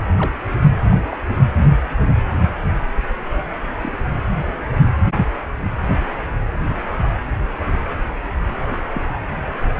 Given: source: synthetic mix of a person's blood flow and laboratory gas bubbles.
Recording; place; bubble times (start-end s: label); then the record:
Doppler ultrasound of blood flow; precordium
0.17-0.32 s: bubbles
0.90-0.97 s: bubbles
1.10-1.17 s: bubbles
3.81-3.93 s: bubbles
5.15-5.24 s: bubbles
5.57-5.69 s: bubbles
6.64-6.80 s: bubbles
8.69-8.79 s: bubbles
8.94-9.02 s: bubbles
From the record:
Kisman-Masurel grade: 121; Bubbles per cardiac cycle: 1 to 2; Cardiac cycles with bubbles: 10 to 50%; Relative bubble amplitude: barely perceptible (0.100 to 0.250); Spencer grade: 2 (many but less than half of the cardiac periods contain bubble signals, singularly or in groups); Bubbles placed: anywhere in the cardiac cycle